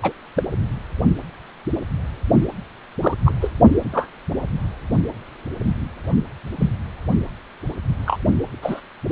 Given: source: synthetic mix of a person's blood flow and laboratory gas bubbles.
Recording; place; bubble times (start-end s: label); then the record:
Doppler ultrasound of blood flow; precordium
0.02-0.12 s: bubbles
0.36-0.42 s: bubbles
3.02-3.14 s: bubbles
3.25-3.33 s: bubbles
3.41-3.51 s: bubbles
3.93-4.08 s: bubbles
6.58-6.70 s: bubbles
8.06-8.17 s: bubbles
8.62-8.80 s: bubbles
From the record:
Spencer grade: 2 (many but less than half of the cardiac periods contain bubble signals, singularly or in groups); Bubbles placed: anywhere in the cardiac cycle